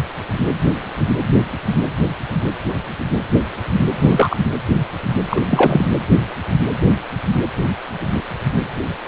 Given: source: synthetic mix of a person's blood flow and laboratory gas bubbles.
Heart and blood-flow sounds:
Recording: Doppler ultrasound of blood flow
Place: precordium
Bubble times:
3.99-4.37 s: bubbles
5.30-5.42 s: bubbles
5.50-5.95 s: bubbles
From the record:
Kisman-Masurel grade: 223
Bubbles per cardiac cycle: several, 3 to 8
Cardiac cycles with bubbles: 10 to 50%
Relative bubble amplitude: loud (0.450 to 0.775)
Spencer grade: 2 (many but less than half of the cardiac periods contain bubble signals, singularly or in groups)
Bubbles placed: anywhere in the cardiac cycle

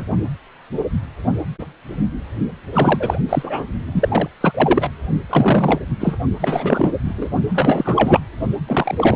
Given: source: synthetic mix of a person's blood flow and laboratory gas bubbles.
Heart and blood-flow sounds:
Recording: Doppler ultrasound of blood flow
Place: precordium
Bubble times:
0.00-0.05 s: bubbles
2.72-3.17 s: bubbles
3.29-3.66 s: bubbles
3.92-4.29 s: bubbles
4.41-4.90 s: bubbles
5.29-5.80 s: bubbles
6.00-6.17 s: bubbles
6.41-6.92 s: bubbles
7.04-7.30 s: bubbles
7.50-8.21 s: bubbles
8.67-8.95 s: bubbles
8.97-9.16 s: bubbles
From the record:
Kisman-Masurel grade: 333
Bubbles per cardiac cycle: rolling drumbeat, 9 or more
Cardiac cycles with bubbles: 50 to 99%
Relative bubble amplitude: loud (0.450 to 0.775)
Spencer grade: 3 (all of the cardiac periods contain showers or single bubble signals, but not dominating or overriding the cardiac motion signals)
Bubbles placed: only in the low amplitude regions of the cardiac cycle

